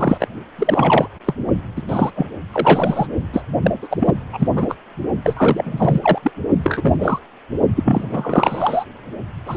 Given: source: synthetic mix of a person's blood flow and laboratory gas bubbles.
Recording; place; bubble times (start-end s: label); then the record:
Doppler ultrasound of blood flow; precordium
0.00-0.27 s: bubbles
0.58-1.07 s: bubbles
1.26-1.34 s: bubbles
1.76-1.82 s: bubbles
1.88-2.11 s: bubbles
2.16-2.27 s: bubbles
2.52-3.07 s: bubbles
3.33-3.42 s: bubbles
3.64-3.71 s: bubbles
3.82-3.88 s: bubbles
3.90-4.15 s: bubbles
4.33-4.48 s: bubbles
4.56-4.75 s: bubbles
5.23-6.19 s: bubbles
6.23-6.31 s: bubbles
6.62-6.96 s: bubbles
6.99-7.20 s: bubbles
7.75-8.07 s: bubbles
8.10-8.84 s: bubbles
9.46-9.56 s: bubbles
From the record:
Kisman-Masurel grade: 343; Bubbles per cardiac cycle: rolling drumbeat, 9 or more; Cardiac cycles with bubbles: 100%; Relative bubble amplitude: loud (0.450 to 0.775); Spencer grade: 3 (all of the cardiac periods contain showers or single bubble signals, but not dominating or overriding the cardiac motion signals); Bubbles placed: only in the low amplitude regions of the cardiac cycle